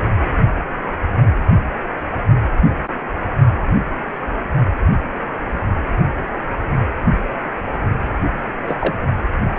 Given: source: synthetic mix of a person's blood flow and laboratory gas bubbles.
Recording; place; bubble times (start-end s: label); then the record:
Doppler ultrasound of blood flow; precordium
8.68-8.76 s: bubbles
8.80-8.95 s: bubbles
From the record:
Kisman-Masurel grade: 112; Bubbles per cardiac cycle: 1 to 2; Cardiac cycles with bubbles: 1 to 10%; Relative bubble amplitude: moderate (0.250 to 0.450); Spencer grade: 1 (occasional bubble signal discernible with the cardiac motion signal, with majority of cardiac periods free of bubbles); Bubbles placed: only in the low amplitude regions of the cardiac cycle